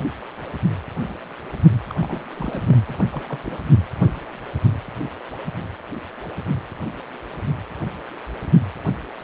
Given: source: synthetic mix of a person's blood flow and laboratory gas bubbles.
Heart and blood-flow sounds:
Doppler ultrasound of blood flow; precordium
1.89-1.94 s: bubbles
2.00-2.25 s: bubbles
2.34-2.63 s: bubbles
2.69-2.77 s: bubbles
2.86-3.01 s: bubbles
3.12-3.23 s: bubbles
3.25-3.38 s: bubbles
3.44-3.58 s: bubbles
From the record:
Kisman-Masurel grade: 221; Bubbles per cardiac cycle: several, 3 to 8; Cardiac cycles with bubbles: 10 to 50%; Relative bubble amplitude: barely perceptible (0.100 to 0.250); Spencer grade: 2 (many but less than half of the cardiac periods contain bubble signals, singularly or in groups); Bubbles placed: anywhere in the cardiac cycle

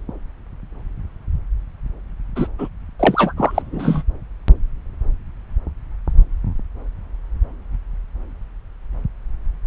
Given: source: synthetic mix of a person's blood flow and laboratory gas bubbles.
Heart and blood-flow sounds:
Doppler ultrasound of blood flow; subclavian vein
2.35-2.48 s: bubbles
2.58-2.69 s: bubbles
2.99-3.33 s: bubbles
3.37-4.03 s: bubbles
From the record:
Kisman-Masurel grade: 213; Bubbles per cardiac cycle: several, 3 to 8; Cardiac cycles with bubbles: 1 to 10%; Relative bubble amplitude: loud (0.450 to 0.775); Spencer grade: 1 (occasional bubble signal discernible with the cardiac motion signal, with majority of cardiac periods free of bubbles); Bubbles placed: anywhere in the cardiac cycle

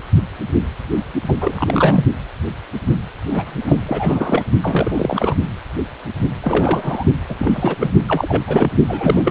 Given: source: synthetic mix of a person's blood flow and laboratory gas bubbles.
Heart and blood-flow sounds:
Doppler ultrasound of blood flow; precordium
0.00-0.02 s: bubbles
1.28-1.35 s: bubbles
1.40-2.04 s: bubbles
3.30-3.77 s: bubbles
3.85-4.44 s: bubbles
4.62-5.34 s: bubbles
6.41-7.04 s: bubbles
7.29-7.36 s: bubbles
7.39-7.77 s: bubbles
7.80-7.90 s: bubbles
8.08-8.42 s: bubbles
8.46-8.71 s: bubbles
8.88-9.31 s: bubbles
From the record:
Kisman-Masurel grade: 332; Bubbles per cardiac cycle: rolling drumbeat, 9 or more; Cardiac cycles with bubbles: 50 to 99%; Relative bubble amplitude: moderate (0.250 to 0.450); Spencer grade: 3 (all of the cardiac periods contain showers or single bubble signals, but not dominating or overriding the cardiac motion signals); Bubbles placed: only in the low amplitude regions of the cardiac cycle

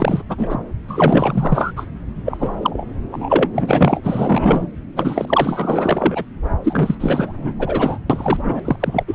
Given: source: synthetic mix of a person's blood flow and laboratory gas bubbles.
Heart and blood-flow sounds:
Doppler ultrasound of blood flow; subclavian vein
0.00-0.22 s: bubbles
0.29-0.59 s: bubbles
0.88-1.72 s: bubbles
1.76-1.86 s: bubbles
2.25-2.86 s: bubbles
3.12-3.48 s: bubbles
3.53-4.00 s: bubbles
4.04-4.67 s: bubbles
4.96-6.24 s: bubbles
6.64-6.95 s: bubbles
6.99-7.53 s: bubbles
7.59-7.99 s: bubbles
8.09-8.60 s: bubbles
8.64-8.76 s: bubbles
8.79-9.04 s: bubbles
9.07-9.15 s: bubbles
From the record:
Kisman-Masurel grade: 444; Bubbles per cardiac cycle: continuous sound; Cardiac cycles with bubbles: 100%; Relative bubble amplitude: maximal (0.775 to 0.999); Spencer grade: 4 (maximum detectable bubble signal sounding continuously throughout systole and diastole of every cardiac period, and overriding the amplitude of the normal cardiac signals); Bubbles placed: anywhere in the cardiac cycle

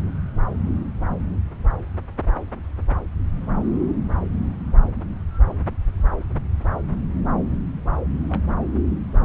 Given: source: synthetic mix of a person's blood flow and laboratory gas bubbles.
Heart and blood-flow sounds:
Doppler ultrasound of blood flow; subclavian vein
8.29-8.41 s: bubbles
8.49-8.55 s: bubbles
From the record:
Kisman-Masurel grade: 111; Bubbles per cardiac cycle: 1 to 2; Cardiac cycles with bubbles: 1 to 10%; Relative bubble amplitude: barely perceptible (0.100 to 0.250); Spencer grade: 1 (occasional bubble signal discernible with the cardiac motion signal, with majority of cardiac periods free of bubbles); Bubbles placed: anywhere in the cardiac cycle

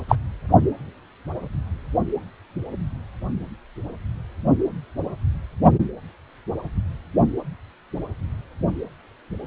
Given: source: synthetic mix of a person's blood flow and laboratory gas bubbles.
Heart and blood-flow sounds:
Doppler ultrasound of blood flow; precordium
0.09-0.15 s: bubbles
From the record:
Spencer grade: 2 (many but less than half of the cardiac periods contain bubble signals, singularly or in groups); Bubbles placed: only in the low amplitude regions of the cardiac cycle

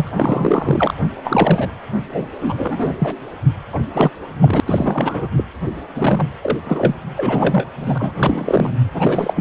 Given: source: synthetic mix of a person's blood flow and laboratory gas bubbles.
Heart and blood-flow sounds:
Doppler ultrasound of blood flow; precordium
0.00-0.10 s: bubbles
0.17-0.94 s: bubbles
1.24-1.70 s: bubbles
2.12-2.28 s: bubbles
2.40-2.94 s: bubbles
2.99-3.15 s: bubbles
3.72-3.79 s: bubbles
3.93-4.11 s: bubbles
4.41-4.60 s: bubbles
4.66-5.29 s: bubbles
5.37-5.45 s: bubbles
5.95-6.29 s: bubbles
6.41-6.58 s: bubbles
6.65-6.95 s: bubbles
7.17-7.67 s: bubbles
7.79-8.14 s: bubbles
8.17-8.70 s: bubbles
8.93-9.41 s: bubbles
From the record:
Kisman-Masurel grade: 343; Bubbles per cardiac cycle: rolling drumbeat, 9 or more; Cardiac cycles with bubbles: 100%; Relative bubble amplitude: loud (0.450 to 0.775); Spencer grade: 3 (all of the cardiac periods contain showers or single bubble signals, but not dominating or overriding the cardiac motion signals); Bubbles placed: anywhere in the cardiac cycle

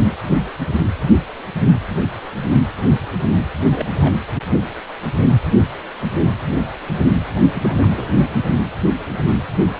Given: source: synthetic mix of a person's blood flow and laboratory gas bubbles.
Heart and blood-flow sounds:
Doppler ultrasound of blood flow; precordium
0.00-0.04 s: bubbles
3.59-4.16 s: bubbles
7.53-7.88 s: bubbles
7.96-8.11 s: bubbles
8.17-8.26 s: bubbles
From the record:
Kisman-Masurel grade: 221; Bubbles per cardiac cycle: several, 3 to 8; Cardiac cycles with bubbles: 10 to 50%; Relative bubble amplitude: barely perceptible (0.100 to 0.250); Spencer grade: 2 (many but less than half of the cardiac periods contain bubble signals, singularly or in groups); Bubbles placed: anywhere in the cardiac cycle

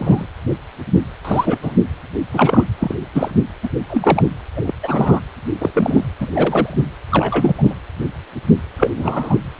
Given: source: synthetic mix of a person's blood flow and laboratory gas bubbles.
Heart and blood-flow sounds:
Doppler ultrasound of blood flow; precordium
0.00-0.26 s: bubbles
1.25-1.58 s: bubbles
1.62-1.72 s: bubbles
2.33-2.65 s: bubbles
2.79-2.94 s: bubbles
3.13-3.32 s: bubbles
3.62-3.69 s: bubbles
3.89-4.25 s: bubbles
4.56-4.61 s: bubbles
4.64-4.74 s: bubbles
4.83-5.20 s: bubbles
5.60-5.71 s: bubbles
5.74-6.04 s: bubbles
6.21-6.30 s: bubbles
6.33-6.76 s: bubbles
7.09-7.77 s: bubbles
8.78-8.90 s: bubbles
8.96-9.37 s: bubbles
From the record:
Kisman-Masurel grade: 233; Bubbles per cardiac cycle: several, 3 to 8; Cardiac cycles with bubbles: 50 to 99%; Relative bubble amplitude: loud (0.450 to 0.775); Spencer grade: 3 (all of the cardiac periods contain showers or single bubble signals, but not dominating or overriding the cardiac motion signals); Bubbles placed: anywhere in the cardiac cycle

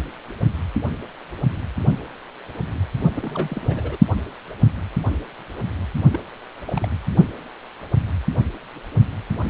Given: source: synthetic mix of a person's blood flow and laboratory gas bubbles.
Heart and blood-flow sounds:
Doppler ultrasound of blood flow; precordium
3.17-3.98 s: bubbles
6.11-6.20 s: bubbles
6.65-6.87 s: bubbles
From the record:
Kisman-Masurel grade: 221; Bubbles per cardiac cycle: several, 3 to 8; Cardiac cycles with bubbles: 10 to 50%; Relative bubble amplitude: barely perceptible (0.100 to 0.250); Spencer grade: 2 (many but less than half of the cardiac periods contain bubble signals, singularly or in groups); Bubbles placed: only in the low amplitude regions of the cardiac cycle

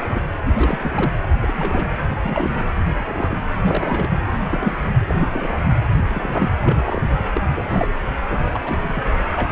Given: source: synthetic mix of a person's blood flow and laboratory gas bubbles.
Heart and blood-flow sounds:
Doppler ultrasound of blood flow; precordium
0.00-0.26 s: bubbles
0.44-1.11 s: bubbles
1.41-1.88 s: bubbles
2.08-2.14 s: bubbles
2.22-2.65 s: bubbles
2.97-3.38 s: bubbles
3.62-4.18 s: bubbles
4.51-4.75 s: bubbles
5.09-5.15 s: bubbles
5.21-5.27 s: bubbles
5.33-5.64 s: bubbles
6.10-6.54 s: bubbles
6.62-6.76 s: bubbles
6.81-7.02 s: bubbles
7.09-7.25 s: bubbles
7.33-7.42 s: bubbles
7.48-7.88 s: bubbles
8.29-8.38 s: bubbles
8.40-8.60 s: bubbles
8.63-9.03 s: bubbles
9.34-9.52 s: bubbles
From the record:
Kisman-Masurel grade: 242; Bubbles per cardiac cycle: several, 3 to 8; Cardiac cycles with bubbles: 100%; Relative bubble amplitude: moderate (0.250 to 0.450); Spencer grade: 3 (all of the cardiac periods contain showers or single bubble signals, but not dominating or overriding the cardiac motion signals); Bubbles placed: anywhere in the cardiac cycle

